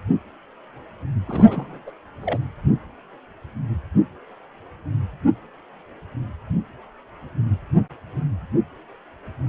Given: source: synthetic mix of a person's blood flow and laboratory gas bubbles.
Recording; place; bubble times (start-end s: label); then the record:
Doppler ultrasound of blood flow; precordium
1.27-1.83 s: bubbles
1.86-1.91 s: bubbles
2.21-2.40 s: bubbles
From the record:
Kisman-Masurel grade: 221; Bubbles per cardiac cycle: several, 3 to 8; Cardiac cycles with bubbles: 10 to 50%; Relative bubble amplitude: barely perceptible (0.100 to 0.250); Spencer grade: 2 (many but less than half of the cardiac periods contain bubble signals, singularly or in groups); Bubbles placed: anywhere in the cardiac cycle